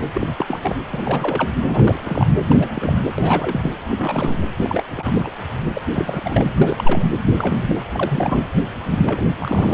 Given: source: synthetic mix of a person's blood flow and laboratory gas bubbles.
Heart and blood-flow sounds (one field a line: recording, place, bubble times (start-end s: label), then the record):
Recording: Doppler ultrasound of blood flow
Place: precordium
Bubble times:
0.14-0.76 s: bubbles
0.91-1.51 s: bubbles
1.66-2.27 s: bubbles
2.50-2.56 s: bubbles
2.59-3.01 s: bubbles
3.18-3.72 s: bubbles
3.88-4.39 s: bubbles
4.57-4.83 s: bubbles
4.92-5.30 s: bubbles
5.73-5.81 s: bubbles
5.91-6.51 s: bubbles
6.61-7.06 s: bubbles
7.37-7.65 s: bubbles
7.68-7.83 s: bubbles
7.95-8.45 s: bubbles
8.86-9.00 s: bubbles
9.04-9.24 s: bubbles
9.38-9.74 s: bubbles
From the record:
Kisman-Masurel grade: 342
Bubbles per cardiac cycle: rolling drumbeat, 9 or more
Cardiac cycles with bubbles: 100%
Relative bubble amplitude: moderate (0.250 to 0.450)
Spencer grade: 3 (all of the cardiac periods contain showers or single bubble signals, but not dominating or overriding the cardiac motion signals)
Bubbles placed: anywhere in the cardiac cycle